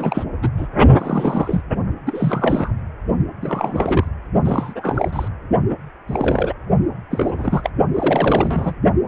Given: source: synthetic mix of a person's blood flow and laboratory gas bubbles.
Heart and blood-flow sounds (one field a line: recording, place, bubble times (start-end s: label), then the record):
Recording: Doppler ultrasound of blood flow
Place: precordium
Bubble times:
0.00-0.24 s: bubbles
0.42-0.49 s: bubbles
0.57-0.68 s: bubbles
0.98-1.62 s: bubbles
2.05-2.72 s: bubbles
3.41-4.07 s: bubbles
4.45-5.28 s: bubbles
5.69-5.75 s: bubbles
6.08-6.53 s: bubbles
7.10-7.69 s: bubbles
7.94-8.74 s: bubbles
From the record:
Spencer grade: 3 (all of the cardiac periods contain showers or single bubble signals, but not dominating or overriding the cardiac motion signals)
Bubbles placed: only in the low amplitude regions of the cardiac cycle